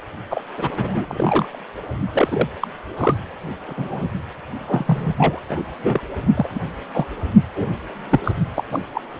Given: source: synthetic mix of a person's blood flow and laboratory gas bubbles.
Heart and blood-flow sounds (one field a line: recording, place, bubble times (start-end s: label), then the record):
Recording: Doppler ultrasound of blood flow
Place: precordium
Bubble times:
0.30-0.43 s: bubbles
0.57-1.58 s: bubbles
2.09-2.48 s: bubbles
2.61-2.67 s: bubbles
2.97-3.15 s: bubbles
3.68-3.74 s: bubbles
3.77-4.07 s: bubbles
4.58-5.15 s: bubbles
5.18-5.40 s: bubbles
5.49-5.62 s: bubbles
5.83-6.01 s: bubbles
6.36-6.48 s: bubbles
6.53-6.61 s: bubbles
6.94-7.06 s: bubbles
7.56-7.67 s: bubbles
8.10-8.21 s: bubbles
8.23-8.33 s: bubbles
8.55-8.63 s: bubbles
8.71-8.85 s: bubbles
8.94-9.02 s: bubbles
From the record:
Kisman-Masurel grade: 242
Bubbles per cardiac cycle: several, 3 to 8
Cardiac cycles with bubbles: 100%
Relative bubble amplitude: moderate (0.250 to 0.450)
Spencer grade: 3 (all of the cardiac periods contain showers or single bubble signals, but not dominating or overriding the cardiac motion signals)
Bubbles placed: anywhere in the cardiac cycle